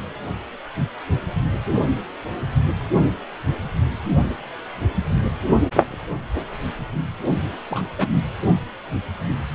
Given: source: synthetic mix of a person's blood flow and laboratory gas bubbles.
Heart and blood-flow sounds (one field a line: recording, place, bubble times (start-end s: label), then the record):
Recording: Doppler ultrasound of blood flow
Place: precordium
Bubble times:
7.70-7.88 s: bubbles
7.98-8.07 s: bubbles
8.13-8.22 s: bubbles
From the record:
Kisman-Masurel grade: 212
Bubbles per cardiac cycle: several, 3 to 8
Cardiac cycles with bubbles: 1 to 10%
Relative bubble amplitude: moderate (0.250 to 0.450)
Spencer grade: 1 (occasional bubble signal discernible with the cardiac motion signal, with majority of cardiac periods free of bubbles)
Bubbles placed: only in the low amplitude regions of the cardiac cycle